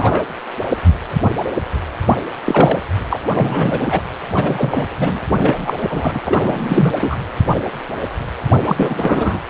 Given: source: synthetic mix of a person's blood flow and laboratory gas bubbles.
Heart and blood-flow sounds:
Doppler ultrasound of blood flow; precordium
0.00-0.26 s: bubbles
2.46-2.79 s: bubbles
3.09-3.20 s: bubbles
3.34-4.00 s: bubbles
4.32-4.86 s: bubbles
4.99-5.20 s: bubbles
5.39-5.75 s: bubbles
5.83-6.20 s: bubbles
6.25-6.93 s: bubbles
6.99-7.16 s: bubbles
8.67-9.40 s: bubbles
From the record:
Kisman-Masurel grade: 333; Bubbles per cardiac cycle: rolling drumbeat, 9 or more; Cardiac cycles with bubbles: 50 to 99%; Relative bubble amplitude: loud (0.450 to 0.775); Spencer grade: 3 (all of the cardiac periods contain showers or single bubble signals, but not dominating or overriding the cardiac motion signals); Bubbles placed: anywhere in the cardiac cycle

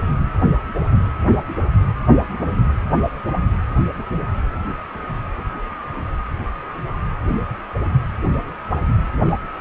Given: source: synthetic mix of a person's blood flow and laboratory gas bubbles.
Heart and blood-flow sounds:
Doppler ultrasound of blood flow; precordium
no bubbles
From the record:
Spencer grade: 0 (complete lack of bubble signals)

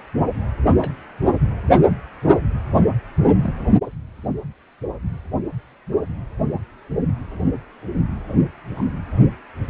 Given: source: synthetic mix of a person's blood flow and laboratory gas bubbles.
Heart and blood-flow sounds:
Doppler ultrasound of blood flow; precordium
0.77-0.90 s: bubbles
1.67-1.81 s: bubbles
2.22-2.38 s: bubbles
3.43-3.54 s: bubbles
8.75-8.86 s: bubbles
From the record:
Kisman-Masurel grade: 121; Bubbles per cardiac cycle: 1 to 2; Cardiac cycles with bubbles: 10 to 50%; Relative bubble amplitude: barely perceptible (0.100 to 0.250); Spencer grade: 2 (many but less than half of the cardiac periods contain bubble signals, singularly or in groups); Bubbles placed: anywhere in the cardiac cycle

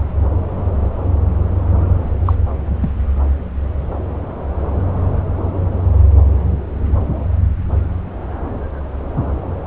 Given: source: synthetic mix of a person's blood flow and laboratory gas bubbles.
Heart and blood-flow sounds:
Doppler ultrasound of blood flow; subclavian vein
2.25-2.35 s: bubbles
2.81-2.90 s: bubbles
From the record:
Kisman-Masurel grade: 112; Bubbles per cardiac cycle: 1 to 2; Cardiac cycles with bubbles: 1 to 10%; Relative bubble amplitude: moderate (0.250 to 0.450); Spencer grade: 1 (occasional bubble signal discernible with the cardiac motion signal, with majority of cardiac periods free of bubbles); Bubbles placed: anywhere in the cardiac cycle

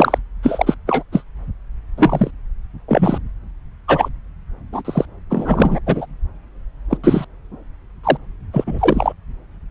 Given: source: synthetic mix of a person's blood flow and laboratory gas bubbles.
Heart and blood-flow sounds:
Doppler ultrasound of blood flow; subclavian vein
0.00-0.18 s: bubbles
0.42-0.75 s: bubbles
0.86-1.03 s: bubbles
1.12-1.23 s: bubbles
1.97-2.30 s: bubbles
2.88-3.18 s: bubbles
3.87-4.08 s: bubbles
4.73-4.82 s: bubbles
4.85-5.06 s: bubbles
5.29-5.79 s: bubbles
5.86-6.06 s: bubbles
6.90-6.97 s: bubbles
7.04-7.25 s: bubbles
8.04-8.17 s: bubbles
8.53-8.64 s: bubbles
8.67-9.12 s: bubbles
From the record:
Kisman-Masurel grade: 243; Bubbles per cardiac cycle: several, 3 to 8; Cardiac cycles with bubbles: 100%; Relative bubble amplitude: loud (0.450 to 0.775); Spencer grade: 3 (all of the cardiac periods contain showers or single bubble signals, but not dominating or overriding the cardiac motion signals); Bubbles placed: anywhere in the cardiac cycle

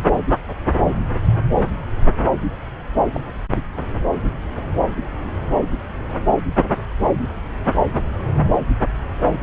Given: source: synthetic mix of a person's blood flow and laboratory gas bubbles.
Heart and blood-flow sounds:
Doppler ultrasound of blood flow; subclavian vein
3.08-3.22 s: bubbles
From the record:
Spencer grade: 1 (occasional bubble signal discernible with the cardiac motion signal, with majority of cardiac periods free of bubbles); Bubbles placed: anywhere in the cardiac cycle

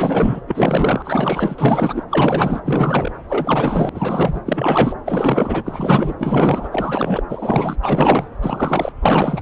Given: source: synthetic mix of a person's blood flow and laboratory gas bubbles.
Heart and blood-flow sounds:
Doppler ultrasound of blood flow; subclavian vein
0.00-0.40 s: bubbles
0.47-2.03 s: bubbles
2.10-2.60 s: bubbles
2.65-3.11 s: bubbles
3.28-3.90 s: bubbles
3.94-4.40 s: bubbles
4.46-4.96 s: bubbles
5.06-5.62 s: bubbles
5.65-6.15 s: bubbles
6.20-7.23 s: bubbles
7.29-7.76 s: bubbles
7.82-8.28 s: bubbles
8.42-8.92 s: bubbles
9.01-9.42 s: bubbles
From the record:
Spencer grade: 4 (maximum detectable bubble signal sounding continuously throughout systole and diastole of every cardiac period, and overriding the amplitude of the normal cardiac signals); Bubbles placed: anywhere in the cardiac cycle

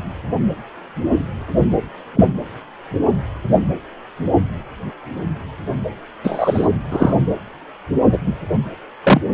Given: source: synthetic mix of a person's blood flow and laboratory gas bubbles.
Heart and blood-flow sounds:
Doppler ultrasound of blood flow; precordium
2.15-2.25 s: bubbles
6.24-6.68 s: bubbles
6.91-7.14 s: bubbles
8.11-8.17 s: bubbles
8.26-8.34 s: bubbles
9.04-9.20 s: bubbles
From the record:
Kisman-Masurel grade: 123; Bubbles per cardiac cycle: 1 to 2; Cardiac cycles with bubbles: 10 to 50%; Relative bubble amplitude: loud (0.450 to 0.775); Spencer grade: 2 (many but less than half of the cardiac periods contain bubble signals, singularly or in groups); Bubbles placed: anywhere in the cardiac cycle

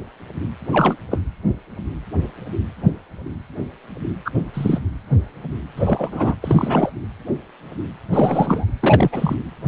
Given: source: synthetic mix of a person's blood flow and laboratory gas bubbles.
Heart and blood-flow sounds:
Doppler ultrasound of blood flow; precordium
0.72-0.96 s: bubbles
1.11-1.19 s: bubbles
4.25-4.31 s: bubbles
4.54-4.82 s: bubbles
5.76-6.35 s: bubbles
6.42-6.91 s: bubbles
8.12-8.65 s: bubbles
8.80-9.09 s: bubbles
9.12-9.35 s: bubbles
From the record:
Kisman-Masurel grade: 223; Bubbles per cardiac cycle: several, 3 to 8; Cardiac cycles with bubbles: 10 to 50%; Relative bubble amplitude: loud (0.450 to 0.775); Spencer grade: 2 (many but less than half of the cardiac periods contain bubble signals, singularly or in groups); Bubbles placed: anywhere in the cardiac cycle

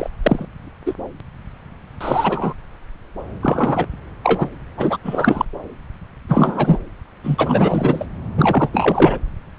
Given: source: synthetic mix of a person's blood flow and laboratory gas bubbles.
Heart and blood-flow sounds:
Doppler ultrasound of blood flow; subclavian vein
0.00-0.08 s: bubbles
0.22-0.45 s: bubbles
0.85-0.93 s: bubbles
2.00-2.53 s: bubbles
3.40-3.86 s: bubbles
4.24-4.49 s: bubbles
4.77-4.97 s: bubbles
5.03-5.46 s: bubbles
6.28-6.79 s: bubbles
7.24-8.06 s: bubbles
8.37-8.69 s: bubbles
8.72-9.18 s: bubbles
From the record:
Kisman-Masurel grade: 243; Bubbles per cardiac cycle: several, 3 to 8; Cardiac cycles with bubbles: 100%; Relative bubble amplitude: loud (0.450 to 0.775); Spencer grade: 3 (all of the cardiac periods contain showers or single bubble signals, but not dominating or overriding the cardiac motion signals); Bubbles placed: anywhere in the cardiac cycle

